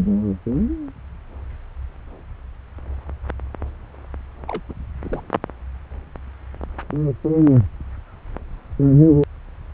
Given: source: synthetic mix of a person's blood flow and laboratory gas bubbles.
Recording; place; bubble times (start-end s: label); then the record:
Doppler ultrasound of blood flow; subclavian vein
4.47-4.60 s: bubbles
4.69-4.73 s: bubbles
5.04-5.21 s: bubbles
From the record:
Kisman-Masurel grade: 211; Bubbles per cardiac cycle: several, 3 to 8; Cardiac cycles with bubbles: 1 to 10%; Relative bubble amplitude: barely perceptible (0.100 to 0.250); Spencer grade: 1 (occasional bubble signal discernible with the cardiac motion signal, with majority of cardiac periods free of bubbles); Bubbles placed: anywhere in the cardiac cycle